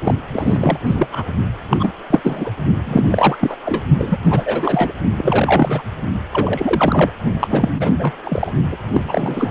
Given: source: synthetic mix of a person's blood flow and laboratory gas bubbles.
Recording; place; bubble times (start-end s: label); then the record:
Doppler ultrasound of blood flow; precordium
0.04-0.15 s: bubbles
0.32-0.78 s: bubbles
0.86-1.07 s: bubbles
1.12-1.24 s: bubbles
1.69-1.93 s: bubbles
2.11-2.21 s: bubbles
2.24-2.51 s: bubbles
2.84-3.57 s: bubbles
3.65-3.83 s: bubbles
3.98-4.17 s: bubbles
4.25-4.92 s: bubbles
5.15-5.83 s: bubbles
6.33-7.11 s: bubbles
7.39-7.69 s: bubbles
7.78-8.12 s: bubbles
8.23-8.52 s: bubbles
8.71-8.77 s: bubbles
8.92-9.51 s: bubbles
From the record:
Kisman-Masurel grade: 343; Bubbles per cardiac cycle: rolling drumbeat, 9 or more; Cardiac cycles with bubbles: 100%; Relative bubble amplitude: loud (0.450 to 0.775); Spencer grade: 3 (all of the cardiac periods contain showers or single bubble signals, but not dominating or overriding the cardiac motion signals); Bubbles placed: only in the low amplitude regions of the cardiac cycle